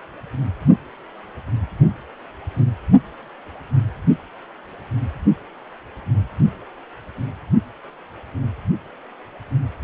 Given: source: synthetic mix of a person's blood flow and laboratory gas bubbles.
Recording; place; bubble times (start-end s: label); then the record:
Doppler ultrasound of blood flow; precordium
no bubbles
From the record:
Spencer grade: 0 (complete lack of bubble signals)